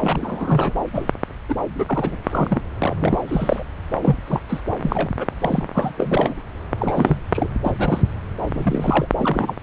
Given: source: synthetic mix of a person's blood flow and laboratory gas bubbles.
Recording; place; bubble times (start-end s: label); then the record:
Doppler ultrasound of blood flow; subclavian vein
0.02-0.72 s: bubbles
0.93-1.12 s: bubbles
1.48-1.55 s: bubbles
1.78-2.16 s: bubbles
2.23-2.61 s: bubbles
2.80-2.94 s: bubbles
3.00-3.19 s: bubbles
3.27-3.63 s: bubbles
3.93-4.17 s: bubbles
4.26-4.41 s: bubbles
4.49-4.62 s: bubbles
4.83-5.08 s: bubbles
5.18-5.26 s: bubbles
5.41-5.64 s: bubbles
5.74-5.92 s: bubbles
5.97-6.34 s: bubbles
6.79-7.21 s: bubbles
7.33-7.48 s: bubbles
7.64-7.73 s: bubbles
7.78-8.11 s: bubbles
8.54-9.07 s: bubbles
9.20-9.57 s: bubbles
From the record:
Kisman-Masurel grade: 242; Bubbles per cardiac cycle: several, 3 to 8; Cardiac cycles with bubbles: 100%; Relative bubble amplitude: moderate (0.250 to 0.450); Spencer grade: 3 (all of the cardiac periods contain showers or single bubble signals, but not dominating or overriding the cardiac motion signals); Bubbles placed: anywhere in the cardiac cycle